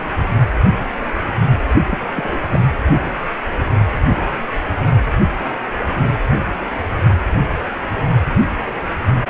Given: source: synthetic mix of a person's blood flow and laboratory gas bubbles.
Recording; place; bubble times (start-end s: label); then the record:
Doppler ultrasound of blood flow; precordium
1.88-1.98 s: bubbles
2.13-2.38 s: bubbles
2.52-2.65 s: bubbles
From the record:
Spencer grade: 2 (many but less than half of the cardiac periods contain bubble signals, singularly or in groups); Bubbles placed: only in the low amplitude regions of the cardiac cycle